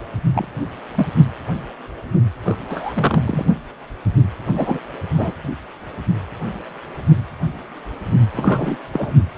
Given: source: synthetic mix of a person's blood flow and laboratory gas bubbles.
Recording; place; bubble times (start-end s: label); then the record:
Doppler ultrasound of blood flow; precordium
0.34-0.48 s: bubbles
0.95-1.07 s: bubbles
2.46-2.57 s: bubbles
2.69-2.93 s: bubbles
2.96-3.21 s: bubbles
3.25-3.46 s: bubbles
4.56-4.79 s: bubbles
5.14-5.34 s: bubbles
8.36-8.76 s: bubbles
8.93-9.14 s: bubbles
From the record:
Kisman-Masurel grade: 222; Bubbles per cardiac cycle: several, 3 to 8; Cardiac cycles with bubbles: 10 to 50%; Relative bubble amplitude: moderate (0.250 to 0.450); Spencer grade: 2 (many but less than half of the cardiac periods contain bubble signals, singularly or in groups); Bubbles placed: only in the low amplitude regions of the cardiac cycle